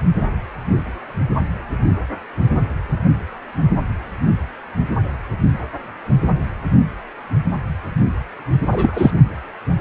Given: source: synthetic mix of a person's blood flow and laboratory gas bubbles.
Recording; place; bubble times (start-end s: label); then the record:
Doppler ultrasound of blood flow; precordium
8.72-9.11 s: bubbles
From the record:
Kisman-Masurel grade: 213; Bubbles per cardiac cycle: several, 3 to 8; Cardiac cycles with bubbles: 1 to 10%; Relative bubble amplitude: loud (0.450 to 0.775); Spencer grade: 1 (occasional bubble signal discernible with the cardiac motion signal, with majority of cardiac periods free of bubbles); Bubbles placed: only in the low amplitude regions of the cardiac cycle